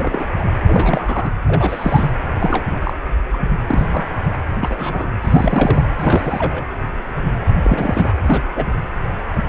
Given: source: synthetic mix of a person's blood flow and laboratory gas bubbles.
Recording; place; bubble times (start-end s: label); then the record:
Doppler ultrasound of blood flow; precordium
0.00-0.28 s: bubbles
0.37-0.45 s: bubbles
0.66-1.32 s: bubbles
1.47-2.12 s: bubbles
2.39-2.65 s: bubbles
2.70-2.94 s: bubbles
3.33-3.38 s: bubbles
3.67-4.08 s: bubbles
4.63-5.08 s: bubbles
5.21-5.84 s: bubbles
5.98-6.64 s: bubbles
7.63-8.12 s: bubbles
8.26-8.42 s: bubbles
8.56-8.66 s: bubbles
From the record:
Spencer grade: 3 (all of the cardiac periods contain showers or single bubble signals, but not dominating or overriding the cardiac motion signals); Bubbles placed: anywhere in the cardiac cycle